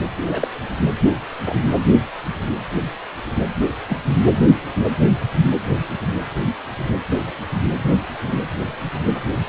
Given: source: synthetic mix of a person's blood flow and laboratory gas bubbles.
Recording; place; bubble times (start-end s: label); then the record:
Doppler ultrasound of blood flow; precordium
0.26-0.57 s: bubbles
1.48-1.59 s: bubbles
3.87-3.98 s: bubbles
From the record:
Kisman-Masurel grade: 122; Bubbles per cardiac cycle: 1 to 2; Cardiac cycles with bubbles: 10 to 50%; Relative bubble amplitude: moderate (0.250 to 0.450); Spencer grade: 2 (many but less than half of the cardiac periods contain bubble signals, singularly or in groups); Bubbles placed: anywhere in the cardiac cycle